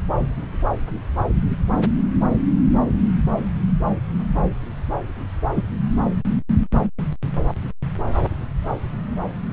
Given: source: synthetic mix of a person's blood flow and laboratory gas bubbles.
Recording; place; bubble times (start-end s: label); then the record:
Doppler ultrasound of blood flow; subclavian vein
5.55-5.62 s: bubbles
From the record:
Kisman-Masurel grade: 113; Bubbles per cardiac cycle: 1 to 2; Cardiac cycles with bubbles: 1 to 10%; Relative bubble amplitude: loud (0.450 to 0.775); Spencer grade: 1 (occasional bubble signal discernible with the cardiac motion signal, with majority of cardiac periods free of bubbles); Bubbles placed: anywhere in the cardiac cycle